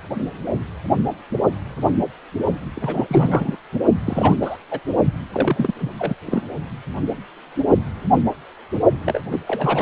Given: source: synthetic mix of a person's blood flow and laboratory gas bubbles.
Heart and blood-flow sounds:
Doppler ultrasound of blood flow; precordium
2.75-3.56 s: bubbles
3.72-3.79 s: bubbles
4.04-4.37 s: bubbles
4.42-4.57 s: bubbles
4.71-4.79 s: bubbles
5.33-5.74 s: bubbles
5.79-5.92 s: bubbles
5.99-6.14 s: bubbles
6.26-6.42 s: bubbles
9.05-9.21 s: bubbles
9.31-9.40 s: bubbles
9.47-9.82 s: bubbles
From the record:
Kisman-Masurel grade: 332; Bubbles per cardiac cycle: rolling drumbeat, 9 or more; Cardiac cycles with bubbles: 50 to 99%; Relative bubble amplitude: moderate (0.250 to 0.450); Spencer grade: 3 (all of the cardiac periods contain showers or single bubble signals, but not dominating or overriding the cardiac motion signals); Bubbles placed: only in the low amplitude regions of the cardiac cycle

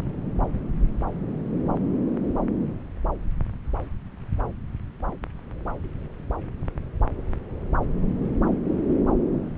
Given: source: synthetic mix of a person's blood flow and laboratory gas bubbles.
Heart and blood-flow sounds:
Doppler ultrasound of blood flow; subclavian vein
8.88-8.93 s: bubbles
From the record:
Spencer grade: 1 (occasional bubble signal discernible with the cardiac motion signal, with majority of cardiac periods free of bubbles); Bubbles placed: anywhere in the cardiac cycle

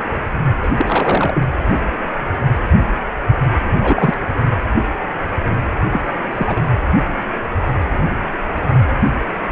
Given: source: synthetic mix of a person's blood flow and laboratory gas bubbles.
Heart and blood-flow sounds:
Doppler ultrasound of blood flow; precordium
0.62-0.69 s: bubbles
0.77-1.43 s: bubbles
3.79-4.14 s: bubbles
5.91-6.00 s: bubbles
6.31-6.71 s: bubbles
From the record:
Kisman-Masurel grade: 222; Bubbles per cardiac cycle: several, 3 to 8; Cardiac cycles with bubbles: 10 to 50%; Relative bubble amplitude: moderate (0.250 to 0.450); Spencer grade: 2 (many but less than half of the cardiac periods contain bubble signals, singularly or in groups); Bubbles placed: anywhere in the cardiac cycle

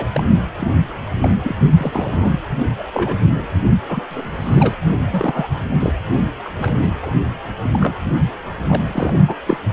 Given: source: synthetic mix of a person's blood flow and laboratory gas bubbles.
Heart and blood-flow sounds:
Doppler ultrasound of blood flow; precordium
0.00-0.07 s: bubbles
0.14-0.26 s: bubbles
0.30-0.40 s: bubbles
0.56-0.67 s: bubbles
1.21-1.36 s: bubbles
1.42-1.56 s: bubbles
1.77-2.40 s: bubbles
2.79-2.83 s: bubbles
2.93-3.18 s: bubbles
3.35-3.48 s: bubbles
3.87-4.02 s: bubbles
4.10-4.77 s: bubbles
5.11-5.47 s: bubbles
5.79-5.92 s: bubbles
6.44-6.49 s: bubbles
6.57-6.93 s: bubbles
7.02-7.10 s: bubbles
7.62-7.70 s: bubbles
7.73-7.95 s: bubbles
8.05-8.12 s: bubbles
8.67-8.81 s: bubbles
8.87-9.15 s: bubbles
9.28-9.36 s: bubbles
9.46-9.57 s: bubbles
From the record:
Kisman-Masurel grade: 242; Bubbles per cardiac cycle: several, 3 to 8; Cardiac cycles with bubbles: 100%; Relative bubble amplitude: moderate (0.250 to 0.450); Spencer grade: 3 (all of the cardiac periods contain showers or single bubble signals, but not dominating or overriding the cardiac motion signals); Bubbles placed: only in the low amplitude regions of the cardiac cycle

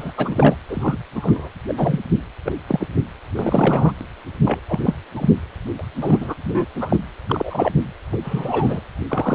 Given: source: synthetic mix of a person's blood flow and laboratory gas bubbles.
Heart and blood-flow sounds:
Doppler ultrasound of blood flow; precordium
0.00-0.12 s: bubbles
0.17-0.58 s: bubbles
0.69-0.99 s: bubbles
1.15-1.50 s: bubbles
1.68-1.99 s: bubbles
2.45-2.52 s: bubbles
2.67-2.88 s: bubbles
3.35-3.93 s: bubbles
4.44-4.59 s: bubbles
4.69-4.79 s: bubbles
4.82-4.95 s: bubbles
5.14-5.29 s: bubbles
5.79-5.83 s: bubbles
6.01-6.34 s: bubbles
6.43-6.66 s: bubbles
6.75-6.96 s: bubbles
7.28-7.72 s: bubbles
8.12-8.18 s: bubbles
8.24-8.82 s: bubbles
9.09-9.35 s: bubbles
From the record:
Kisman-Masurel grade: 243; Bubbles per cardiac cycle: several, 3 to 8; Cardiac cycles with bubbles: 100%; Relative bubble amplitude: loud (0.450 to 0.775); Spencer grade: 3 (all of the cardiac periods contain showers or single bubble signals, but not dominating or overriding the cardiac motion signals); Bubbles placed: anywhere in the cardiac cycle

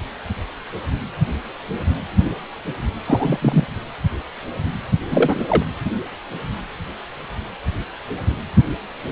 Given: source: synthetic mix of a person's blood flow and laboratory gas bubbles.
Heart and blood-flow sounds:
Doppler ultrasound of blood flow; precordium
3.05-3.65 s: bubbles
5.09-5.62 s: bubbles
From the record:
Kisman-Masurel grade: 223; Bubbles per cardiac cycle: several, 3 to 8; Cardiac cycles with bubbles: 10 to 50%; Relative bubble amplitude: loud (0.450 to 0.775); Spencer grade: 2 (many but less than half of the cardiac periods contain bubble signals, singularly or in groups); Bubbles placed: anywhere in the cardiac cycle

